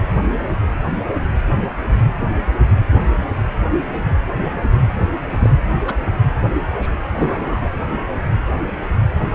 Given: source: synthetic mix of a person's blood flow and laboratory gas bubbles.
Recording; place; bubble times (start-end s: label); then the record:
Doppler ultrasound of blood flow; precordium
5.29-5.50 s: bubbles
5.87-5.95 s: bubbles
6.82-6.91 s: bubbles
7.17-7.71 s: bubbles
From the record:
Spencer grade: 2 (many but less than half of the cardiac periods contain bubble signals, singularly or in groups); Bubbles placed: anywhere in the cardiac cycle